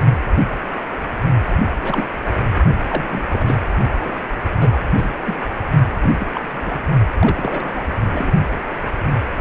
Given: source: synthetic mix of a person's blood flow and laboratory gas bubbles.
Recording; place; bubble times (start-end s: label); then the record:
Doppler ultrasound of blood flow; precordium
1.45-1.53 s: bubbles
1.81-2.06 s: bubbles
2.89-3.55 s: bubbles
3.92-4.17 s: bubbles
4.60-4.77 s: bubbles
4.97-5.10 s: bubbles
5.24-5.36 s: bubbles
6.00-6.11 s: bubbles
6.19-6.27 s: bubbles
6.33-6.80 s: bubbles
7.19-7.82 s: bubbles
8.12-8.31 s: bubbles
From the record:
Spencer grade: 3 (all of the cardiac periods contain showers or single bubble signals, but not dominating or overriding the cardiac motion signals); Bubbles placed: only in the low amplitude regions of the cardiac cycle